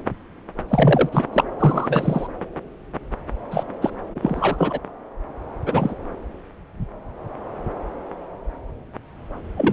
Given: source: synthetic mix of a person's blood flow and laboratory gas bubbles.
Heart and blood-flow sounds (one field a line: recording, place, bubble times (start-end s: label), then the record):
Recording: Doppler ultrasound of blood flow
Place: subclavian vein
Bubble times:
0.68-1.24 s: bubbles
1.32-1.44 s: bubbles
1.59-2.27 s: bubbles
3.51-3.64 s: bubbles
3.81-3.90 s: bubbles
4.15-4.20 s: bubbles
4.22-4.79 s: bubbles
5.66-5.94 s: bubbles
9.57-9.72 s: bubbles
From the record:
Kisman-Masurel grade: 222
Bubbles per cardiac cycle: several, 3 to 8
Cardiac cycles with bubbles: 10 to 50%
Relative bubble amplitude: moderate (0.250 to 0.450)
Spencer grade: 2 (many but less than half of the cardiac periods contain bubble signals, singularly or in groups)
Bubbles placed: anywhere in the cardiac cycle